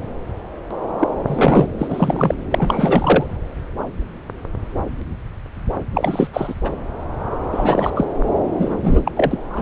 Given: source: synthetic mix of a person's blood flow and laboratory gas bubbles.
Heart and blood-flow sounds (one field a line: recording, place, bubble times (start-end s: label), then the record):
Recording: Doppler ultrasound of blood flow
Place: subclavian vein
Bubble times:
0.99-1.08 s: bubbles
1.27-1.69 s: bubbles
1.78-2.35 s: bubbles
2.51-3.26 s: bubbles
5.94-6.29 s: bubbles
6.33-6.54 s: bubbles
6.64-6.70 s: bubbles
7.52-7.91 s: bubbles
7.96-8.05 s: bubbles
8.58-9.12 s: bubbles
9.15-9.42 s: bubbles
9.50-9.62 s: bubbles
From the record:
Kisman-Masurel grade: 333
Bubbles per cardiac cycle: rolling drumbeat, 9 or more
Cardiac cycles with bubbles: 50 to 99%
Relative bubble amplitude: loud (0.450 to 0.775)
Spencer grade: 3 (all of the cardiac periods contain showers or single bubble signals, but not dominating or overriding the cardiac motion signals)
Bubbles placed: anywhere in the cardiac cycle